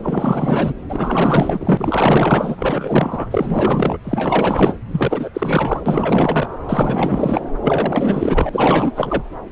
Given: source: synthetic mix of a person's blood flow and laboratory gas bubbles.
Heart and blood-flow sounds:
Doppler ultrasound of blood flow; subclavian vein
0.03-0.73 s: bubbles
0.89-3.27 s: bubbles
3.31-3.99 s: bubbles
4.04-4.74 s: bubbles
4.92-5.30 s: bubbles
5.33-5.80 s: bubbles
5.86-6.48 s: bubbles
6.68-7.50 s: bubbles
7.62-8.50 s: bubbles
8.53-8.93 s: bubbles
8.96-9.22 s: bubbles
From the record:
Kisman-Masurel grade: 444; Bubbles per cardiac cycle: continuous sound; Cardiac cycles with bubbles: 100%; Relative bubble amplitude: maximal (0.775 to 0.999); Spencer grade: 4 (maximum detectable bubble signal sounding continuously throughout systole and diastole of every cardiac period, and overriding the amplitude of the normal cardiac signals); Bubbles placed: anywhere in the cardiac cycle

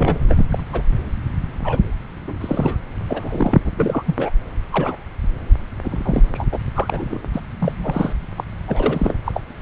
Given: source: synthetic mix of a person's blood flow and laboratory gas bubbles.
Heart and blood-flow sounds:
Doppler ultrasound of blood flow; subclavian vein
0.00-0.19 s: bubbles
0.28-0.46 s: bubbles
0.52-0.63 s: bubbles
0.72-0.83 s: bubbles
1.60-1.79 s: bubbles
2.27-2.35 s: bubbles
2.40-2.77 s: bubbles
3.09-3.59 s: bubbles
3.64-3.72 s: bubbles
3.77-4.04 s: bubbles
4.06-4.33 s: bubbles
4.71-4.97 s: bubbles
5.83-6.23 s: bubbles
6.34-6.46 s: bubbles
6.51-6.58 s: bubbles
6.75-7.18 s: bubbles
7.33-7.41 s: bubbles
7.59-8.12 s: bubbles
8.37-8.44 s: bubbles
8.68-9.18 s: bubbles
9.24-9.32 s: bubbles
9.35-9.41 s: bubbles
9.60-9.62 s: bubbles
From the record:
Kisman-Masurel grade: 242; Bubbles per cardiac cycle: several, 3 to 8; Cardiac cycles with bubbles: 100%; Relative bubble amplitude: moderate (0.250 to 0.450); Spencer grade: 3 (all of the cardiac periods contain showers or single bubble signals, but not dominating or overriding the cardiac motion signals); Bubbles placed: anywhere in the cardiac cycle

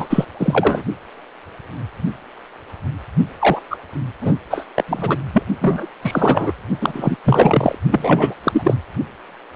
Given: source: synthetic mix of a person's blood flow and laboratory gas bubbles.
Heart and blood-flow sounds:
Doppler ultrasound of blood flow; precordium
0.00-0.26 s: bubbles
0.39-0.83 s: bubbles
3.40-3.60 s: bubbles
3.70-3.77 s: bubbles
4.21-4.35 s: bubbles
4.50-4.66 s: bubbles
4.75-4.84 s: bubbles
4.88-5.17 s: bubbles
5.33-5.43 s: bubbles
5.61-5.86 s: bubbles
6.02-6.52 s: bubbles
6.81-7.16 s: bubbles
7.24-7.75 s: bubbles
7.91-8.34 s: bubbles
8.43-8.74 s: bubbles
From the record:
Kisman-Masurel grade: 333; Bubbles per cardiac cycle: rolling drumbeat, 9 or more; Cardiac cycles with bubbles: 50 to 99%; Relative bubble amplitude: loud (0.450 to 0.775); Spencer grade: 3 (all of the cardiac periods contain showers or single bubble signals, but not dominating or overriding the cardiac motion signals); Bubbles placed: only in the low amplitude regions of the cardiac cycle

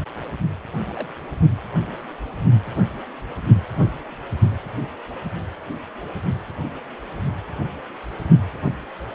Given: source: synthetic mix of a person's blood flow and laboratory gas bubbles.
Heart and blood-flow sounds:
Doppler ultrasound of blood flow; precordium
0.91-1.08 s: bubbles
From the record:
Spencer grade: 2 (many but less than half of the cardiac periods contain bubble signals, singularly or in groups); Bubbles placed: only in the low amplitude regions of the cardiac cycle

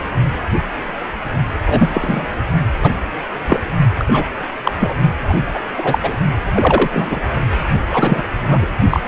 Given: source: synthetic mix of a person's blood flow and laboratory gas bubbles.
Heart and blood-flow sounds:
Doppler ultrasound of blood flow; precordium
1.65-2.26 s: bubbles
2.81-2.92 s: bubbles
3.46-3.59 s: bubbles
3.98-4.34 s: bubbles
4.64-4.72 s: bubbles
4.80-4.95 s: bubbles
5.29-5.34 s: bubbles
5.54-5.59 s: bubbles
5.76-5.98 s: bubbles
6.02-6.16 s: bubbles
6.52-7.19 s: bubbles
7.90-8.22 s: bubbles
8.50-8.66 s: bubbles
8.90-9.00 s: bubbles
From the record:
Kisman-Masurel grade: 233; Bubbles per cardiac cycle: several, 3 to 8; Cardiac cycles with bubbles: 50 to 99%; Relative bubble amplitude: loud (0.450 to 0.775); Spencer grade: 3 (all of the cardiac periods contain showers or single bubble signals, but not dominating or overriding the cardiac motion signals); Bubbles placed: only in the low amplitude regions of the cardiac cycle

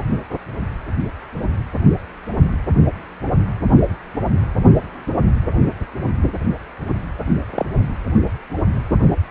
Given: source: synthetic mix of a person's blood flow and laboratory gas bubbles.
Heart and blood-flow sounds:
Doppler ultrasound of blood flow; precordium
7.56-7.66 s: bubbles
From the record:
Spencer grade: 1 (occasional bubble signal discernible with the cardiac motion signal, with majority of cardiac periods free of bubbles); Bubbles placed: anywhere in the cardiac cycle

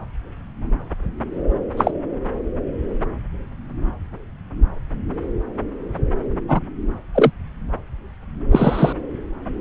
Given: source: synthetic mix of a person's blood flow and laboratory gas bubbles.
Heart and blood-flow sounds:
Doppler ultrasound of blood flow; subclavian vein
1.77-1.91 s: bubbles
6.48-6.60 s: bubbles
7.14-7.30 s: bubbles
8.51-8.93 s: bubbles
From the record:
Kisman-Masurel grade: 123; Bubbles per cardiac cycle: 1 to 2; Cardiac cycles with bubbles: 10 to 50%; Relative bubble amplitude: loud (0.450 to 0.775); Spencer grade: 2 (many but less than half of the cardiac periods contain bubble signals, singularly or in groups); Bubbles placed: anywhere in the cardiac cycle

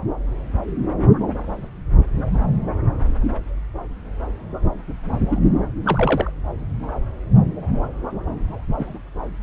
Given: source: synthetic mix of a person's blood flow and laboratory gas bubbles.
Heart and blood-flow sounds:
Doppler ultrasound of blood flow; subclavian vein
5.29-5.39 s: bubbles
5.83-6.30 s: bubbles
8.78-9.00 s: bubbles
From the record:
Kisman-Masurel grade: 122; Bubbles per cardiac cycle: 1 to 2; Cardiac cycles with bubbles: 10 to 50%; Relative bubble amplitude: moderate (0.250 to 0.450); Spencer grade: 2 (many but less than half of the cardiac periods contain bubble signals, singularly or in groups); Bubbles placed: anywhere in the cardiac cycle

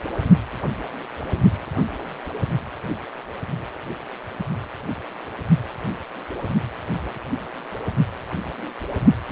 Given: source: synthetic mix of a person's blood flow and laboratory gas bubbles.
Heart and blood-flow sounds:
Doppler ultrasound of blood flow; precordium
no bubbles
From the record:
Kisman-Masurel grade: 000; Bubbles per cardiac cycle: 0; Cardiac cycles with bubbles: 0%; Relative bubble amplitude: no bubbles discernible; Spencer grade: 0 (complete lack of bubble signals)

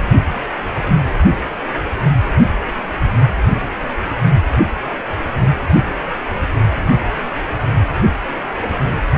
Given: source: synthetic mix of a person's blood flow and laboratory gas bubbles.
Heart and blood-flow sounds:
Doppler ultrasound of blood flow; precordium
0.81-0.93 s: bubbles
From the record:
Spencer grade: 2 (many but less than half of the cardiac periods contain bubble signals, singularly or in groups); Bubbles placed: only in the low amplitude regions of the cardiac cycle

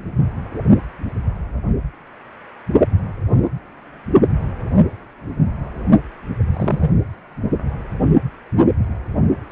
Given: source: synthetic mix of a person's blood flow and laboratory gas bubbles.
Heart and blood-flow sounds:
Doppler ultrasound of blood flow; precordium
6.53-6.92 s: bubbles
From the record:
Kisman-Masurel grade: 112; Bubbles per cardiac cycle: 1 to 2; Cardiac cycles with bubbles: 1 to 10%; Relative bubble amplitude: moderate (0.250 to 0.450); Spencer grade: 1 (occasional bubble signal discernible with the cardiac motion signal, with majority of cardiac periods free of bubbles); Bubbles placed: anywhere in the cardiac cycle

